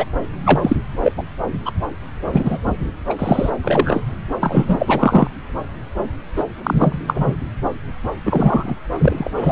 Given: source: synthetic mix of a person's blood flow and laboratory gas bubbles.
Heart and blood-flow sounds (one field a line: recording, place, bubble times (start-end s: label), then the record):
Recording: Doppler ultrasound of blood flow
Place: subclavian vein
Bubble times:
0.00-0.05 s: bubbles
0.44-0.76 s: bubbles
1.02-1.12 s: bubbles
1.17-1.22 s: bubbles
1.65-1.72 s: bubbles
2.33-2.58 s: bubbles
3.09-3.15 s: bubbles
3.19-3.50 s: bubbles
3.62-4.01 s: bubbles
4.40-5.27 s: bubbles
6.36-6.43 s: bubbles
6.63-6.99 s: bubbles
7.07-7.37 s: bubbles
8.25-8.75 s: bubbles
8.92-9.30 s: bubbles
9.37-9.52 s: bubbles
From the record:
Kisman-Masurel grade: 243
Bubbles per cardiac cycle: several, 3 to 8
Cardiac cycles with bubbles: 100%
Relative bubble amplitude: loud (0.450 to 0.775)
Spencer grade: 3 (all of the cardiac periods contain showers or single bubble signals, but not dominating or overriding the cardiac motion signals)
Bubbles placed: anywhere in the cardiac cycle